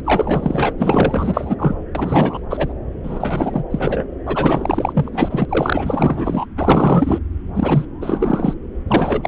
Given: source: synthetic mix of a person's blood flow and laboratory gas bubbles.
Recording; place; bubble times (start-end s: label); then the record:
Doppler ultrasound of blood flow; subclavian vein
0.04-0.73 s: bubbles
0.78-1.74 s: bubbles
1.95-2.40 s: bubbles
2.50-2.73 s: bubbles
3.03-3.64 s: bubbles
3.71-4.04 s: bubbles
4.25-5.09 s: bubbles
5.12-5.46 s: bubbles
5.49-6.46 s: bubbles
6.57-7.18 s: bubbles
7.54-7.85 s: bubbles
8.01-8.54 s: bubbles
8.88-9.28 s: bubbles
From the record:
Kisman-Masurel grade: 444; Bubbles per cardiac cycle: continuous sound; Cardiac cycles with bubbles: 100%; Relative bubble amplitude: maximal (0.775 to 0.999); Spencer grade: 4 (maximum detectable bubble signal sounding continuously throughout systole and diastole of every cardiac period, and overriding the amplitude of the normal cardiac signals); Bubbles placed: anywhere in the cardiac cycle